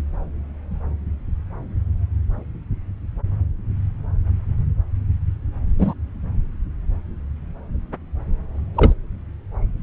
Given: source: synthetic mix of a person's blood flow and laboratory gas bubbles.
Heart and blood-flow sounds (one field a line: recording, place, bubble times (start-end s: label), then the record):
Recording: Doppler ultrasound of blood flow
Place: subclavian vein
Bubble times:
5.79-5.94 s: bubbles
8.75-8.93 s: bubbles
From the record:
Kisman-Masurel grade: 113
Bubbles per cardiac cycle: 1 to 2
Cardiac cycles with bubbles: 1 to 10%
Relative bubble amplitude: loud (0.450 to 0.775)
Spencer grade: 1 (occasional bubble signal discernible with the cardiac motion signal, with majority of cardiac periods free of bubbles)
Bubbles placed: anywhere in the cardiac cycle